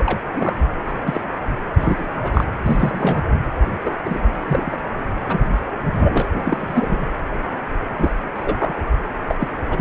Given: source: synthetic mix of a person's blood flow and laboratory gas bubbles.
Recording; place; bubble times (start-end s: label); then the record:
Doppler ultrasound of blood flow; precordium
0.00-0.18 s: bubbles
0.35-0.57 s: bubbles
0.84-0.92 s: bubbles
1.06-1.21 s: bubbles
1.77-2.16 s: bubbles
2.23-2.44 s: bubbles
2.65-3.23 s: bubbles
3.85-3.95 s: bubbles
4.04-4.20 s: bubbles
4.39-4.78 s: bubbles
5.27-5.46 s: bubbles
5.79-6.25 s: bubbles
6.33-7.06 s: bubbles
7.97-8.12 s: bubbles
8.35-8.74 s: bubbles
9.28-9.35 s: bubbles
9.40-9.48 s: bubbles
9.70-9.81 s: bubbles
From the record:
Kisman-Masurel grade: 242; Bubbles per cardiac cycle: several, 3 to 8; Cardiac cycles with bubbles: 100%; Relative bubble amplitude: moderate (0.250 to 0.450); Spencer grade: 3 (all of the cardiac periods contain showers or single bubble signals, but not dominating or overriding the cardiac motion signals); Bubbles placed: anywhere in the cardiac cycle